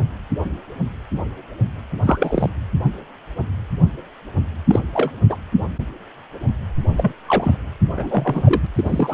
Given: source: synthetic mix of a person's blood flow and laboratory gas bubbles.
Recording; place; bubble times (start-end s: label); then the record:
Doppler ultrasound of blood flow; precordium
2.02-2.50 s: bubbles
4.67-4.79 s: bubbles
4.93-5.11 s: bubbles
5.29-5.36 s: bubbles
6.97-7.12 s: bubbles
7.28-7.57 s: bubbles
7.96-8.67 s: bubbles
8.75-9.14 s: bubbles
From the record:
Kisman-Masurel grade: 223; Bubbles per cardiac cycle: several, 3 to 8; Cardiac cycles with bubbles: 10 to 50%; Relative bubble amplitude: loud (0.450 to 0.775); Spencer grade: 2 (many but less than half of the cardiac periods contain bubble signals, singularly or in groups); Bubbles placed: anywhere in the cardiac cycle